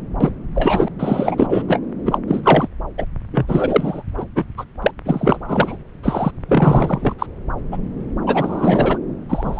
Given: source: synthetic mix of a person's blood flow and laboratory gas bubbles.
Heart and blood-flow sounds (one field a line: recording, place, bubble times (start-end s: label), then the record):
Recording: Doppler ultrasound of blood flow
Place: subclavian vein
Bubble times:
0.21-0.30 s: bubbles
0.55-0.89 s: bubbles
0.99-1.79 s: bubbles
2.05-2.18 s: bubbles
2.27-2.41 s: bubbles
2.44-2.67 s: bubbles
2.98-3.06 s: bubbles
3.31-4.03 s: bubbles
4.17-4.26 s: bubbles
4.35-4.45 s: bubbles
4.58-4.64 s: bubbles
4.82-4.91 s: bubbles
5.06-5.41 s: bubbles
5.47-5.77 s: bubbles
6.03-6.32 s: bubbles
6.49-7.13 s: bubbles
7.18-7.26 s: bubbles
7.71-7.77 s: bubbles
8.26-8.98 s: bubbles
9.29-9.60 s: bubbles
From the record:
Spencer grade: 3 (all of the cardiac periods contain showers or single bubble signals, but not dominating or overriding the cardiac motion signals)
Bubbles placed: anywhere in the cardiac cycle